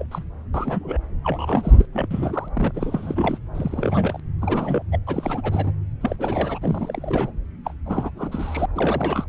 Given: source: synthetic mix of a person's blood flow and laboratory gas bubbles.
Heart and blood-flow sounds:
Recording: Doppler ultrasound of blood flow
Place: subclavian vein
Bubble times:
0.00-0.06 s: bubbles
0.11-0.23 s: bubbles
0.54-0.98 s: bubbles
1.24-1.86 s: bubbles
1.93-2.08 s: bubbles
2.11-2.49 s: bubbles
2.54-2.71 s: bubbles
2.75-3.38 s: bubbles
3.54-4.20 s: bubbles
4.42-4.83 s: bubbles
4.92-4.99 s: bubbles
5.07-5.71 s: bubbles
6.01-6.16 s: bubbles
6.19-6.58 s: bubbles
6.62-7.31 s: bubbles
7.65-7.74 s: bubbles
7.85-8.10 s: bubbles
8.16-8.66 s: bubbles
8.75-9.26 s: bubbles
From the record:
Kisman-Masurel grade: 342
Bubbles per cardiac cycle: rolling drumbeat, 9 or more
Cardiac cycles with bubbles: 100%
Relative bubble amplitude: moderate (0.250 to 0.450)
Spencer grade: 3 (all of the cardiac periods contain showers or single bubble signals, but not dominating or overriding the cardiac motion signals)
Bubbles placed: anywhere in the cardiac cycle

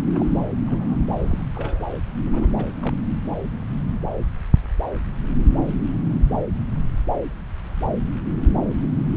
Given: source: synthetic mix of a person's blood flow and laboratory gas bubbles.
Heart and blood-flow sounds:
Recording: Doppler ultrasound of blood flow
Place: subclavian vein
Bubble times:
0.15-0.39 s: bubbles
0.66-1.05 s: bubbles
1.18-1.46 s: bubbles
1.54-1.85 s: bubbles
2.25-2.47 s: bubbles
2.56-2.64 s: bubbles
2.79-2.94 s: bubbles
From the record:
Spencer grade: 2 (many but less than half of the cardiac periods contain bubble signals, singularly or in groups)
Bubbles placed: anywhere in the cardiac cycle

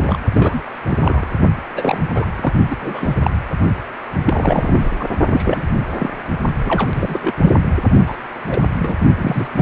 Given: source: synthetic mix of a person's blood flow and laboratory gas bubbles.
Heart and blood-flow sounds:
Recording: Doppler ultrasound of blood flow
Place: precordium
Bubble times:
0.00-0.17 s: bubbles
0.33-0.61 s: bubbles
0.88-1.25 s: bubbles
1.76-2.00 s: bubbles
2.14-2.26 s: bubbles
2.35-2.53 s: bubbles
2.70-2.75 s: bubbles
2.80-3.16 s: bubbles
3.23-3.31 s: bubbles
4.25-4.91 s: bubbles
4.99-5.08 s: bubbles
5.25-5.62 s: bubbles
6.00-6.10 s: bubbles
6.64-7.34 s: bubbles
7.41-7.52 s: bubbles
8.06-8.17 s: bubbles
8.49-8.61 s: bubbles
8.79-8.96 s: bubbles
9.18-9.48 s: bubbles
9.54-9.62 s: bubbles
From the record:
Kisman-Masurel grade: 242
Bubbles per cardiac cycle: several, 3 to 8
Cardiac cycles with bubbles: 100%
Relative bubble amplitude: moderate (0.250 to 0.450)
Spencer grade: 3 (all of the cardiac periods contain showers or single bubble signals, but not dominating or overriding the cardiac motion signals)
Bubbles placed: only in the low amplitude regions of the cardiac cycle

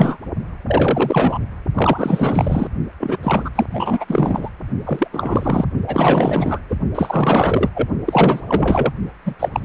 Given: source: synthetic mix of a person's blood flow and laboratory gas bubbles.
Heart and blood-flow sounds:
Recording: Doppler ultrasound of blood flow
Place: precordium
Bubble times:
0.00-0.17 s: bubbles
0.68-1.39 s: bubbles
1.74-2.68 s: bubbles
3.00-3.18 s: bubbles
3.23-3.50 s: bubbles
3.55-3.66 s: bubbles
3.71-4.49 s: bubbles
4.84-5.07 s: bubbles
5.12-5.65 s: bubbles
5.86-6.63 s: bubbles
6.69-6.75 s: bubbles
6.94-7.69 s: bubbles
7.75-7.88 s: bubbles
8.05-8.92 s: bubbles
9.24-9.35 s: bubbles
9.39-9.49 s: bubbles
9.52-9.65 s: bubbles
From the record:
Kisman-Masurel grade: 444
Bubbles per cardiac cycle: continuous sound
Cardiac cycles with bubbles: 100%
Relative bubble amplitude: maximal (0.775 to 0.999)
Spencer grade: 4 (maximum detectable bubble signal sounding continuously throughout systole and diastole of every cardiac period, and overriding the amplitude of the normal cardiac signals)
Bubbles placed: only in the low amplitude regions of the cardiac cycle

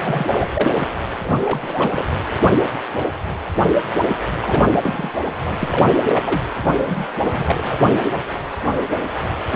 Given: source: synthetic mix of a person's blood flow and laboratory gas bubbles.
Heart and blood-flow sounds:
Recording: Doppler ultrasound of blood flow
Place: precordium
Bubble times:
0.00-0.27 s: bubbles
0.30-0.87 s: bubbles
1.24-2.06 s: bubbles
4.41-5.10 s: bubbles
5.44-5.89 s: bubbles
6.13-6.43 s: bubbles
6.74-7.06 s: bubbles
7.21-7.78 s: bubbles
From the record:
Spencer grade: 3 (all of the cardiac periods contain showers or single bubble signals, but not dominating or overriding the cardiac motion signals)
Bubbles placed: anywhere in the cardiac cycle

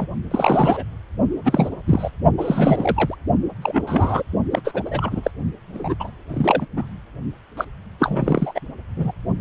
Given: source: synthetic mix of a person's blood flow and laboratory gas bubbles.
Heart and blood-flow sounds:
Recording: Doppler ultrasound of blood flow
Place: precordium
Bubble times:
0.00-0.07 s: bubbles
0.30-0.83 s: bubbles
1.44-1.69 s: bubbles
1.86-2.11 s: bubbles
2.38-3.16 s: bubbles
3.62-3.81 s: bubbles
3.87-4.23 s: bubbles
4.51-4.83 s: bubbles
4.85-5.31 s: bubbles
5.73-5.95 s: bubbles
6.00-6.10 s: bubbles
6.29-6.66 s: bubbles
6.76-6.89 s: bubbles
7.57-7.65 s: bubbles
8.00-8.60 s: bubbles
8.96-9.11 s: bubbles
From the record:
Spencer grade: 3 (all of the cardiac periods contain showers or single bubble signals, but not dominating or overriding the cardiac motion signals)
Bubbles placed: only in the low amplitude regions of the cardiac cycle

